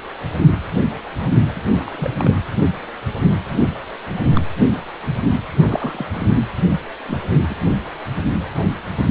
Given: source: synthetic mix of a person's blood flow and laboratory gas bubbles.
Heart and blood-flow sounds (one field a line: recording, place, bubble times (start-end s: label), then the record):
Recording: Doppler ultrasound of blood flow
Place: precordium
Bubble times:
1.55-1.61 s: bubbles
1.65-2.37 s: bubbles
3.58-3.68 s: bubbles
4.34-4.46 s: bubbles
5.60-6.37 s: bubbles
7.08-7.36 s: bubbles
7.50-7.56 s: bubbles
From the record:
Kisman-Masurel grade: 221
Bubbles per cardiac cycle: several, 3 to 8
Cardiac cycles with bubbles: 10 to 50%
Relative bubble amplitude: barely perceptible (0.100 to 0.250)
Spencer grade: 2 (many but less than half of the cardiac periods contain bubble signals, singularly or in groups)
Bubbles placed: anywhere in the cardiac cycle